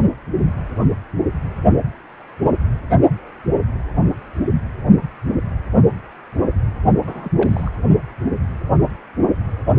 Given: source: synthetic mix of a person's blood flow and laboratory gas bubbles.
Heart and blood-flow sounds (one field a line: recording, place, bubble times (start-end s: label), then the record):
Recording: Doppler ultrasound of blood flow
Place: precordium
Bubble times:
7.04-7.31 s: bubbles
7.37-7.69 s: bubbles
From the record:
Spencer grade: 1 (occasional bubble signal discernible with the cardiac motion signal, with majority of cardiac periods free of bubbles)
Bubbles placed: only in the low amplitude regions of the cardiac cycle